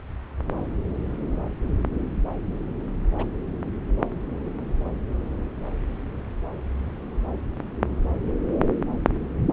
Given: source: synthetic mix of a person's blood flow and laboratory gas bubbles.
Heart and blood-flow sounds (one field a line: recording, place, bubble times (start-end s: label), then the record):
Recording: Doppler ultrasound of blood flow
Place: subclavian vein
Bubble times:
3.18-3.25 s: bubbles
From the record:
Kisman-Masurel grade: 112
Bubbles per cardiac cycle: 1 to 2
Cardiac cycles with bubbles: 1 to 10%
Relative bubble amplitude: moderate (0.250 to 0.450)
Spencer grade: 1 (occasional bubble signal discernible with the cardiac motion signal, with majority of cardiac periods free of bubbles)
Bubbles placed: anywhere in the cardiac cycle